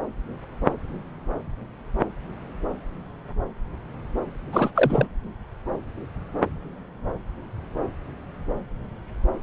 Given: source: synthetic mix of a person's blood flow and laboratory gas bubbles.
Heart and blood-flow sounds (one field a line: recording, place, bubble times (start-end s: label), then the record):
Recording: Doppler ultrasound of blood flow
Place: subclavian vein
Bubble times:
4.52-4.71 s: bubbles
4.75-5.08 s: bubbles
From the record:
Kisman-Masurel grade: 213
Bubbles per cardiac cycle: several, 3 to 8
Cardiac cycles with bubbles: 1 to 10%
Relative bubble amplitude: loud (0.450 to 0.775)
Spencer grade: 1 (occasional bubble signal discernible with the cardiac motion signal, with majority of cardiac periods free of bubbles)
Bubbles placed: anywhere in the cardiac cycle